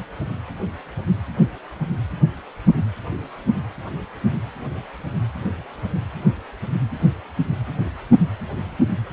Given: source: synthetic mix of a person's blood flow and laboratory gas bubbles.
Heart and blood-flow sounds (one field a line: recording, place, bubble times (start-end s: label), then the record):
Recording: Doppler ultrasound of blood flow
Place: precordium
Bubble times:
no bubbles
From the record:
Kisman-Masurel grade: 000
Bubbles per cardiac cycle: 0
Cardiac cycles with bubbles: 0%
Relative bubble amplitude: no bubbles discernible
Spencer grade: 0 (complete lack of bubble signals)